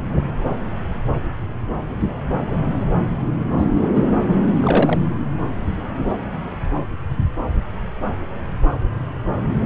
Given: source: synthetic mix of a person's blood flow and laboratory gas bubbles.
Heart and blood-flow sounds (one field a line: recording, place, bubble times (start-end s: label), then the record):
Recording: Doppler ultrasound of blood flow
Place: subclavian vein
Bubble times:
3.58-4.03 s: bubbles
4.61-5.00 s: bubbles
From the record:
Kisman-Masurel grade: 212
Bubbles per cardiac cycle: several, 3 to 8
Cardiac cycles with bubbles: 1 to 10%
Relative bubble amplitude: moderate (0.250 to 0.450)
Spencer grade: 1 (occasional bubble signal discernible with the cardiac motion signal, with majority of cardiac periods free of bubbles)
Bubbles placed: anywhere in the cardiac cycle